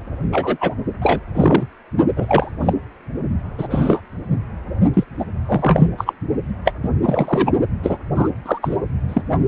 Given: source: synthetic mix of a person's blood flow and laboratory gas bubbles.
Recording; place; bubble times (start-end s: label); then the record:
Doppler ultrasound of blood flow; precordium
0.32-0.57 s: bubbles
0.60-0.74 s: bubbles
1.02-1.20 s: bubbles
1.34-1.66 s: bubbles
2.16-2.51 s: bubbles
2.60-2.73 s: bubbles
3.58-3.67 s: bubbles
3.70-4.02 s: bubbles
4.94-5.04 s: bubbles
5.19-5.25 s: bubbles
5.46-5.88 s: bubbles
5.98-6.14 s: bubbles
6.64-6.72 s: bubbles
6.83-6.90 s: bubbles
7.02-7.52 s: bubbles
7.83-7.98 s: bubbles
8.15-8.29 s: bubbles
8.46-8.58 s: bubbles
8.62-8.77 s: bubbles
9.08-9.21 s: bubbles
From the record:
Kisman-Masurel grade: 243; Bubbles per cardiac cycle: several, 3 to 8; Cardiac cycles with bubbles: 100%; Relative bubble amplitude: loud (0.450 to 0.775); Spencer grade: 3 (all of the cardiac periods contain showers or single bubble signals, but not dominating or overriding the cardiac motion signals); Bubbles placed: only in the low amplitude regions of the cardiac cycle